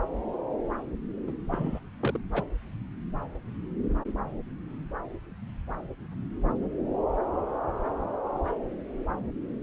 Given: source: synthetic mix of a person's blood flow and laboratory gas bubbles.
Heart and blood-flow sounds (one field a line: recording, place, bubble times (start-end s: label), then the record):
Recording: Doppler ultrasound of blood flow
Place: subclavian vein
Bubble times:
1.27-1.31 s: bubbles
1.52-1.79 s: bubbles
2.00-2.18 s: bubbles
2.33-2.44 s: bubbles
From the record:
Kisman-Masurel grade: 211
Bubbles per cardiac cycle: several, 3 to 8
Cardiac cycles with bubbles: 1 to 10%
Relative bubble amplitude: barely perceptible (0.100 to 0.250)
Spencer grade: 1 (occasional bubble signal discernible with the cardiac motion signal, with majority of cardiac periods free of bubbles)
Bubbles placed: anywhere in the cardiac cycle